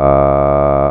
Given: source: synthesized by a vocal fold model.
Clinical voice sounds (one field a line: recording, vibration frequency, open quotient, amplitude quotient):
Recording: sustained vowel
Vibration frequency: 70 Hz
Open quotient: 0.4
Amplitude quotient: 1.4